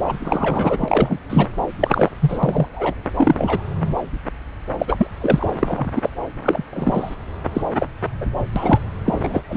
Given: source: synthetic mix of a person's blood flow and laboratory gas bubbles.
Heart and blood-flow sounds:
Doppler ultrasound of blood flow; subclavian vein
0.07-0.17 s: bubbles
0.23-1.19 s: bubbles
1.29-1.47 s: bubbles
1.79-2.10 s: bubbles
2.21-2.40 s: bubbles
2.43-2.67 s: bubbles
2.73-2.94 s: bubbles
3.17-3.62 s: bubbles
4.79-5.07 s: bubbles
5.21-5.48 s: bubbles
5.59-5.86 s: bubbles
5.95-6.09 s: bubbles
6.42-6.62 s: bubbles
6.73-7.15 s: bubbles
7.54-7.62 s: bubbles
7.78-7.87 s: bubbles
8.21-8.26 s: bubbles
8.55-8.79 s: bubbles
9.05-9.41 s: bubbles
9.48-9.57 s: bubbles
From the record:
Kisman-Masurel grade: 233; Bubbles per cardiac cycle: several, 3 to 8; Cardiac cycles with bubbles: 50 to 99%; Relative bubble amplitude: loud (0.450 to 0.775); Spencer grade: 3 (all of the cardiac periods contain showers or single bubble signals, but not dominating or overriding the cardiac motion signals); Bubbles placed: anywhere in the cardiac cycle

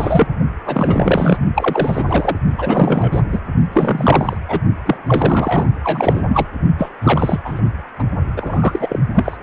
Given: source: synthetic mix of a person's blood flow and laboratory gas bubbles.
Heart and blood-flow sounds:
Doppler ultrasound of blood flow; precordium
0.00-0.27 s: bubbles
0.66-1.39 s: bubbles
1.55-2.38 s: bubbles
2.58-3.23 s: bubbles
3.31-3.39 s: bubbles
3.73-4.37 s: bubbles
4.49-4.59 s: bubbles
4.85-4.97 s: bubbles
5.06-5.67 s: bubbles
5.83-6.22 s: bubbles
6.28-6.46 s: bubbles
6.78-6.90 s: bubbles
7.01-7.39 s: bubbles
7.45-7.61 s: bubbles
7.98-8.03 s: bubbles
8.37-8.99 s: bubbles
9.15-9.37 s: bubbles
From the record:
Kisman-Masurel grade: 343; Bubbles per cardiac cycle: rolling drumbeat, 9 or more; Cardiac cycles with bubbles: 100%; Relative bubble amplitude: loud (0.450 to 0.775); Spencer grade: 3 (all of the cardiac periods contain showers or single bubble signals, but not dominating or overriding the cardiac motion signals); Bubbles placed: only in the low amplitude regions of the cardiac cycle

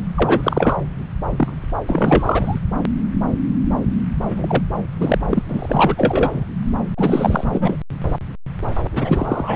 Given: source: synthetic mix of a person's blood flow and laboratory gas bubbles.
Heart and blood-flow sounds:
Doppler ultrasound of blood flow; subclavian vein
0.15-0.75 s: bubbles
1.36-1.61 s: bubbles
1.86-2.58 s: bubbles
4.27-4.64 s: bubbles
4.99-5.18 s: bubbles
5.29-5.43 s: bubbles
5.48-6.46 s: bubbles
6.97-7.45 s: bubbles
7.52-7.77 s: bubbles
8.93-9.55 s: bubbles
From the record:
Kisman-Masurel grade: 333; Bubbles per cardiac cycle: rolling drumbeat, 9 or more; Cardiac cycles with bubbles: 50 to 99%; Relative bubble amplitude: loud (0.450 to 0.775); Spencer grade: 3 (all of the cardiac periods contain showers or single bubble signals, but not dominating or overriding the cardiac motion signals); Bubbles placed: anywhere in the cardiac cycle

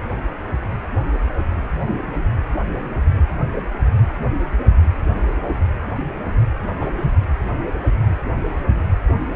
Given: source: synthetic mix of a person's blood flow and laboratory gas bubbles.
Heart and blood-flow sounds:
Doppler ultrasound of blood flow; precordium
6.80-6.88 s: bubbles
6.96-7.12 s: bubbles
From the record:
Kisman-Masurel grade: 112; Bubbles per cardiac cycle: 1 to 2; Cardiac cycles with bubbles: 1 to 10%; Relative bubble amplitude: moderate (0.250 to 0.450); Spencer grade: 1 (occasional bubble signal discernible with the cardiac motion signal, with majority of cardiac periods free of bubbles); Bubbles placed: anywhere in the cardiac cycle

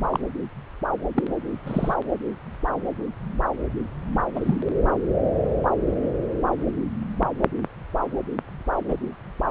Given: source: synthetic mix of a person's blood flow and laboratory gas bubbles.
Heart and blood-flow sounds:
Doppler ultrasound of blood flow; subclavian vein
0.11-0.20 s: bubbles
1.16-1.22 s: bubbles
1.66-1.94 s: bubbles
4.35-4.57 s: bubbles
8.89-8.97 s: bubbles
From the record:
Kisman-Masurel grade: 122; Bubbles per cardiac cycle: 1 to 2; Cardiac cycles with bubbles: 10 to 50%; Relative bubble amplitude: moderate (0.250 to 0.450); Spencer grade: 2 (many but less than half of the cardiac periods contain bubble signals, singularly or in groups); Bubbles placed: anywhere in the cardiac cycle

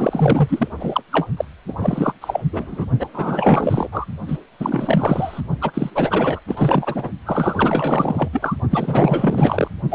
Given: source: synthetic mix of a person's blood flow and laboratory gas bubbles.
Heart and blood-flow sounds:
Doppler ultrasound of blood flow; precordium
0.00-0.67 s: bubbles
0.79-1.01 s: bubbles
1.12-1.27 s: bubbles
1.36-1.45 s: bubbles
1.67-1.74 s: bubbles
1.78-2.12 s: bubbles
2.21-2.44 s: bubbles
2.52-2.86 s: bubbles
2.99-3.08 s: bubbles
3.13-4.06 s: bubbles
4.27-4.38 s: bubbles
4.60-5.41 s: bubbles
5.61-5.71 s: bubbles
5.74-5.90 s: bubbles
5.94-6.40 s: bubbles
6.47-7.09 s: bubbles
7.25-8.29 s: bubbles
8.33-8.57 s: bubbles
8.71-9.68 s: bubbles
9.91-9.95 s: bubbles
From the record:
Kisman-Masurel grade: 444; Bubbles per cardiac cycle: continuous sound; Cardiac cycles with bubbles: 100%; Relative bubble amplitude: maximal (0.775 to 0.999); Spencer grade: 4 (maximum detectable bubble signal sounding continuously throughout systole and diastole of every cardiac period, and overriding the amplitude of the normal cardiac signals); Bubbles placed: only in the low amplitude regions of the cardiac cycle

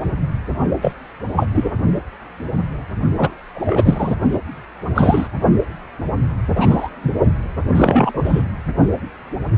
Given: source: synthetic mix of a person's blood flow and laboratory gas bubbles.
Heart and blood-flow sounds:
Doppler ultrasound of blood flow; precordium
0.81-0.92 s: bubbles
1.35-1.46 s: bubbles
1.54-1.71 s: bubbles
3.16-3.31 s: bubbles
3.54-4.15 s: bubbles
4.31-4.40 s: bubbles
4.95-5.29 s: bubbles
6.54-6.89 s: bubbles
7.02-7.11 s: bubbles
7.75-8.43 s: bubbles
From the record:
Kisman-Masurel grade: 233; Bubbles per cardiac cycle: several, 3 to 8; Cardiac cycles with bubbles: 50 to 99%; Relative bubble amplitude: loud (0.450 to 0.775); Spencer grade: 3 (all of the cardiac periods contain showers or single bubble signals, but not dominating or overriding the cardiac motion signals); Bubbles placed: only in the low amplitude regions of the cardiac cycle

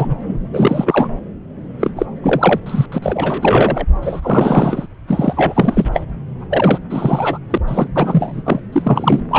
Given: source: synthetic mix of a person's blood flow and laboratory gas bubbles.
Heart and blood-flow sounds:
Doppler ultrasound of blood flow; subclavian vein
0.00-0.15 s: bubbles
0.26-0.37 s: bubbles
0.53-1.08 s: bubbles
1.80-1.91 s: bubbles
1.96-2.06 s: bubbles
2.23-2.60 s: bubbles
2.66-2.86 s: bubbles
2.92-2.99 s: bubbles
3.02-3.85 s: bubbles
4.01-4.86 s: bubbles
5.07-5.88 s: bubbles
5.93-6.01 s: bubbles
6.50-6.79 s: bubbles
6.89-7.38 s: bubbles
7.50-7.57 s: bubbles
7.67-7.88 s: bubbles
7.95-8.41 s: bubbles
8.45-8.59 s: bubbles
8.72-9.21 s: bubbles
9.30-9.39 s: bubbles
From the record:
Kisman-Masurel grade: 333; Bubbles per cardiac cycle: rolling drumbeat, 9 or more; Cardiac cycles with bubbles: 50 to 99%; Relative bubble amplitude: loud (0.450 to 0.775); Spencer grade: 3 (all of the cardiac periods contain showers or single bubble signals, but not dominating or overriding the cardiac motion signals); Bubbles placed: anywhere in the cardiac cycle

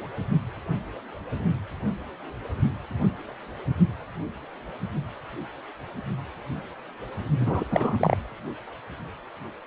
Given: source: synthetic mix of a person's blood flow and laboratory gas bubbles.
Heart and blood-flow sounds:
Doppler ultrasound of blood flow; precordium
7.40-7.64 s: bubbles
7.71-8.17 s: bubbles
From the record:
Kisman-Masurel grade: 222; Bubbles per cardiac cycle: several, 3 to 8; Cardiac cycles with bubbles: 10 to 50%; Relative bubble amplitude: moderate (0.250 to 0.450); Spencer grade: 2 (many but less than half of the cardiac periods contain bubble signals, singularly or in groups); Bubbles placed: only in the low amplitude regions of the cardiac cycle

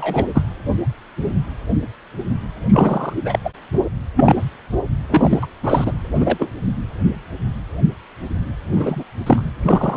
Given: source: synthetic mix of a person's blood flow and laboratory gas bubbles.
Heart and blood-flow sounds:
Doppler ultrasound of blood flow; precordium
0.00-0.26 s: bubbles
0.34-0.42 s: bubbles
2.70-3.14 s: bubbles
3.24-3.39 s: bubbles
3.44-3.50 s: bubbles
4.16-4.36 s: bubbles
5.09-5.46 s: bubbles
5.62-5.92 s: bubbles
6.16-6.52 s: bubbles
8.71-9.04 s: bubbles
9.26-9.51 s: bubbles
9.62-9.97 s: bubbles
From the record:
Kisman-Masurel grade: 233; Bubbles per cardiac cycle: several, 3 to 8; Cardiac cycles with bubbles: 50 to 99%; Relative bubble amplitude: loud (0.450 to 0.775); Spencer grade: 3 (all of the cardiac periods contain showers or single bubble signals, but not dominating or overriding the cardiac motion signals); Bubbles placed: anywhere in the cardiac cycle

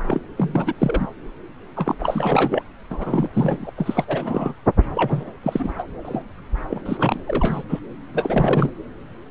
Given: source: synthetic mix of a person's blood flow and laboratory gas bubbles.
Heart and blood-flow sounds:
Doppler ultrasound of blood flow; subclavian vein
0.02-0.21 s: bubbles
0.37-0.75 s: bubbles
0.78-1.08 s: bubbles
1.76-1.95 s: bubbles
1.99-2.62 s: bubbles
2.90-3.29 s: bubbles
3.33-3.71 s: bubbles
3.77-4.04 s: bubbles
4.07-4.54 s: bubbles
4.94-5.23 s: bubbles
5.42-5.74 s: bubbles
5.78-5.84 s: bubbles
6.04-6.23 s: bubbles
6.69-6.82 s: bubbles
6.85-7.20 s: bubbles
7.27-7.63 s: bubbles
7.69-7.79 s: bubbles
8.14-8.70 s: bubbles
From the record:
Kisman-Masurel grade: 332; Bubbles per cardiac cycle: rolling drumbeat, 9 or more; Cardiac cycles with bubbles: 50 to 99%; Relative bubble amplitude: moderate (0.250 to 0.450); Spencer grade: 3 (all of the cardiac periods contain showers or single bubble signals, but not dominating or overriding the cardiac motion signals); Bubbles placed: anywhere in the cardiac cycle

